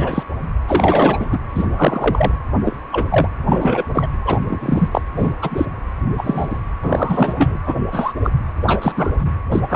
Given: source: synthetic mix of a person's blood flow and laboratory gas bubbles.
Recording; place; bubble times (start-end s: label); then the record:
Doppler ultrasound of blood flow; precordium
0.00-0.23 s: bubbles
0.68-1.40 s: bubbles
1.54-1.67 s: bubbles
1.76-2.31 s: bubbles
2.65-2.77 s: bubbles
2.92-3.07 s: bubbles
3.10-3.28 s: bubbles
3.46-3.83 s: bubbles
3.94-4.07 s: bubbles
4.25-4.42 s: bubbles
4.46-4.89 s: bubbles
4.91-5.02 s: bubbles
5.15-5.33 s: bubbles
5.42-5.66 s: bubbles
6.18-6.58 s: bubbles
6.83-7.57 s: bubbles
7.67-7.75 s: bubbles
7.92-8.13 s: bubbles
8.24-8.30 s: bubbles
8.62-9.35 s: bubbles
9.52-9.60 s: bubbles
9.70-9.76 s: bubbles
From the record:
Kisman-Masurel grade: 233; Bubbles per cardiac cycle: several, 3 to 8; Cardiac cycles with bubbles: 50 to 99%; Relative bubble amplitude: loud (0.450 to 0.775); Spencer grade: 3 (all of the cardiac periods contain showers or single bubble signals, but not dominating or overriding the cardiac motion signals); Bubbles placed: anywhere in the cardiac cycle